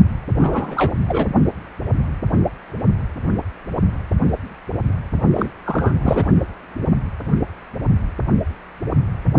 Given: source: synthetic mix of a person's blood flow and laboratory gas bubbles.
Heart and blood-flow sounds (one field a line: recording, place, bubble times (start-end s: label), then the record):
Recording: Doppler ultrasound of blood flow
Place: precordium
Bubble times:
0.41-0.93 s: bubbles
1.08-1.27 s: bubbles
5.33-5.50 s: bubbles
5.66-5.94 s: bubbles
6.02-6.28 s: bubbles
From the record:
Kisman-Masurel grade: 222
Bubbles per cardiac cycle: several, 3 to 8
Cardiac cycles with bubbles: 10 to 50%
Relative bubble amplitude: moderate (0.250 to 0.450)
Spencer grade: 2 (many but less than half of the cardiac periods contain bubble signals, singularly or in groups)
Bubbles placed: only in the low amplitude regions of the cardiac cycle